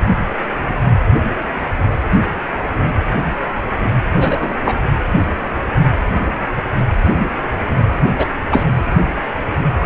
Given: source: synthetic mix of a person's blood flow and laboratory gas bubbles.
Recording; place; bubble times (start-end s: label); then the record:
Doppler ultrasound of blood flow; precordium
4.15-4.54 s: bubbles
4.65-4.78 s: bubbles
8.18-8.26 s: bubbles
8.51-8.64 s: bubbles
From the record:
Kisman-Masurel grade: 223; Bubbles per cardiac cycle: several, 3 to 8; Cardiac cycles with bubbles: 10 to 50%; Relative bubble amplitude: loud (0.450 to 0.775); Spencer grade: 2 (many but less than half of the cardiac periods contain bubble signals, singularly or in groups); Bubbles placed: anywhere in the cardiac cycle